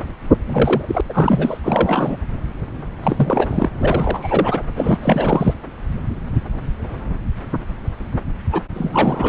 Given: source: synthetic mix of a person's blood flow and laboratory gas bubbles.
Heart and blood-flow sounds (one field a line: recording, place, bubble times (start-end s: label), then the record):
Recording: Doppler ultrasound of blood flow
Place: subclavian vein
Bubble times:
0.47-0.82 s: bubbles
0.86-1.01 s: bubbles
1.09-1.57 s: bubbles
1.64-2.17 s: bubbles
3.03-3.69 s: bubbles
3.79-4.62 s: bubbles
4.75-4.98 s: bubbles
5.02-5.54 s: bubbles
8.51-8.61 s: bubbles
8.74-9.29 s: bubbles
From the record:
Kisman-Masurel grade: 332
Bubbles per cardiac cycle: rolling drumbeat, 9 or more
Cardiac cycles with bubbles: 50 to 99%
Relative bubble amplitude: moderate (0.250 to 0.450)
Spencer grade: 3 (all of the cardiac periods contain showers or single bubble signals, but not dominating or overriding the cardiac motion signals)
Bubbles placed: anywhere in the cardiac cycle